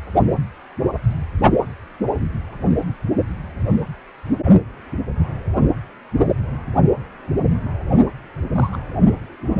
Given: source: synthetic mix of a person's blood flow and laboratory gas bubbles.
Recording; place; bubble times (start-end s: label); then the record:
Doppler ultrasound of blood flow; precordium
8.54-8.70 s: bubbles
8.73-8.78 s: bubbles
From the record:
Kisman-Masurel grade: 112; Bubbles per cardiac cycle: 1 to 2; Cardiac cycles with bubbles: 1 to 10%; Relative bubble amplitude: moderate (0.250 to 0.450); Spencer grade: 1 (occasional bubble signal discernible with the cardiac motion signal, with majority of cardiac periods free of bubbles); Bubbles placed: anywhere in the cardiac cycle